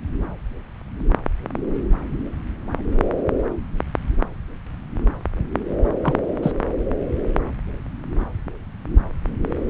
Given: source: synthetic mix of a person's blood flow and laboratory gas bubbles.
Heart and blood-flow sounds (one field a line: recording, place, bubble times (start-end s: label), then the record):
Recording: Doppler ultrasound of blood flow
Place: subclavian vein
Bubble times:
6.03-6.14 s: bubbles
6.42-6.51 s: bubbles
From the record:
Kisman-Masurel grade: 112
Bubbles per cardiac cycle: 1 to 2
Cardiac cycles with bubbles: 1 to 10%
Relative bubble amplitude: moderate (0.250 to 0.450)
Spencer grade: 1 (occasional bubble signal discernible with the cardiac motion signal, with majority of cardiac periods free of bubbles)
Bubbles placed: anywhere in the cardiac cycle